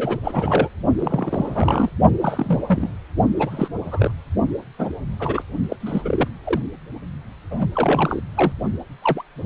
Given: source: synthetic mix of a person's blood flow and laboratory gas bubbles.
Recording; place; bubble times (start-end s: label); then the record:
Doppler ultrasound of blood flow; precordium
0.00-0.18 s: bubbles
0.24-0.69 s: bubbles
0.99-1.90 s: bubbles
2.20-2.59 s: bubbles
2.66-2.92 s: bubbles
3.37-3.68 s: bubbles
3.84-4.11 s: bubbles
4.79-4.89 s: bubbles
5.20-5.42 s: bubbles
5.70-5.77 s: bubbles
5.80-6.28 s: bubbles
6.44-6.62 s: bubbles
7.50-7.68 s: bubbles
7.72-8.21 s: bubbles
8.35-8.52 s: bubbles
9.02-9.22 s: bubbles
9.43-9.46 s: bubbles
From the record:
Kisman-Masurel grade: 242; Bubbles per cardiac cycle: several, 3 to 8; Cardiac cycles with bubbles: 100%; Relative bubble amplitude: moderate (0.250 to 0.450); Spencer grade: 3 (all of the cardiac periods contain showers or single bubble signals, but not dominating or overriding the cardiac motion signals); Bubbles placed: only in the low amplitude regions of the cardiac cycle